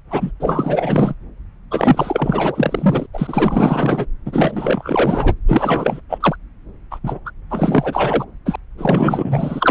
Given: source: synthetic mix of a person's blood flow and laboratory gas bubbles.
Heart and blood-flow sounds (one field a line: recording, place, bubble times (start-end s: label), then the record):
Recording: Doppler ultrasound of blood flow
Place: subclavian vein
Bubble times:
0.11-0.32 s: bubbles
0.40-1.15 s: bubbles
1.71-3.06 s: bubbles
3.13-4.07 s: bubbles
4.25-5.35 s: bubbles
5.48-6.01 s: bubbles
6.09-6.36 s: bubbles
6.91-7.00 s: bubbles
7.04-7.20 s: bubbles
7.25-7.31 s: bubbles
7.50-8.25 s: bubbles
8.46-8.56 s: bubbles
8.78-9.71 s: bubbles
From the record:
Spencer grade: 4 (maximum detectable bubble signal sounding continuously throughout systole and diastole of every cardiac period, and overriding the amplitude of the normal cardiac signals)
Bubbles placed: anywhere in the cardiac cycle